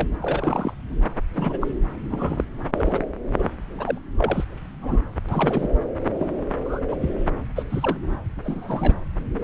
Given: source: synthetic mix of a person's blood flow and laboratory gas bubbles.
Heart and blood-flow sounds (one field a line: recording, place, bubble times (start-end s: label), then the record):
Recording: Doppler ultrasound of blood flow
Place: subclavian vein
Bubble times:
0.00-0.08 s: bubbles
0.22-0.74 s: bubbles
1.34-1.58 s: bubbles
1.61-1.67 s: bubbles
2.10-2.45 s: bubbles
2.77-2.98 s: bubbles
3.38-3.50 s: bubbles
3.78-3.98 s: bubbles
4.17-4.44 s: bubbles
4.79-4.99 s: bubbles
5.28-5.70 s: bubbles
6.19-6.36 s: bubbles
6.64-6.80 s: bubbles
6.88-6.96 s: bubbles
7.01-7.09 s: bubbles
7.55-7.64 s: bubbles
7.69-7.97 s: bubbles
8.44-8.98 s: bubbles
From the record:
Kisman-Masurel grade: 242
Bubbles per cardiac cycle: several, 3 to 8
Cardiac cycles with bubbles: 100%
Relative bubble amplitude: moderate (0.250 to 0.450)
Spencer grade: 3 (all of the cardiac periods contain showers or single bubble signals, but not dominating or overriding the cardiac motion signals)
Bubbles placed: anywhere in the cardiac cycle